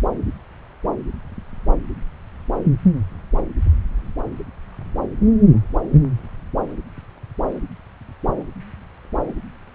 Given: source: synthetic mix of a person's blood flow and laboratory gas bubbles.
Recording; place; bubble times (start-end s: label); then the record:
Doppler ultrasound of blood flow; subclavian vein
no bubbles
From the record:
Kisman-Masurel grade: 000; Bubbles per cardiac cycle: 0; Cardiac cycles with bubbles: 0%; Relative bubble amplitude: no bubbles discernible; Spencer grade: 0 (complete lack of bubble signals)